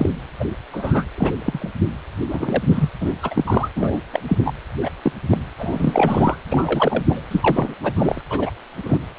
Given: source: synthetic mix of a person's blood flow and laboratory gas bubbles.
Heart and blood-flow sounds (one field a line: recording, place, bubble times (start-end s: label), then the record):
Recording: Doppler ultrasound of blood flow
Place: precordium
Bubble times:
0.00-0.09 s: bubbles
0.40-0.45 s: bubbles
0.72-1.04 s: bubbles
1.17-1.31 s: bubbles
1.36-1.71 s: bubbles
2.29-2.62 s: bubbles
2.70-2.89 s: bubbles
3.00-3.14 s: bubbles
3.23-3.69 s: bubbles
3.76-3.98 s: bubbles
4.13-4.21 s: bubbles
4.28-4.38 s: bubbles
4.45-4.53 s: bubbles
4.81-4.90 s: bubbles
5.02-5.12 s: bubbles
5.30-5.38 s: bubbles
5.59-6.36 s: bubbles
6.49-7.03 s: bubbles
7.09-7.21 s: bubbles
7.30-7.74 s: bubbles
7.83-7.93 s: bubbles
7.96-8.21 s: bubbles
8.29-8.51 s: bubbles
8.83-8.97 s: bubbles
From the record:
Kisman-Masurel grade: 243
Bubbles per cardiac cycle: several, 3 to 8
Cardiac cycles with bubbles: 100%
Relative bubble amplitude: loud (0.450 to 0.775)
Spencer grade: 3 (all of the cardiac periods contain showers or single bubble signals, but not dominating or overriding the cardiac motion signals)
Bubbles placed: anywhere in the cardiac cycle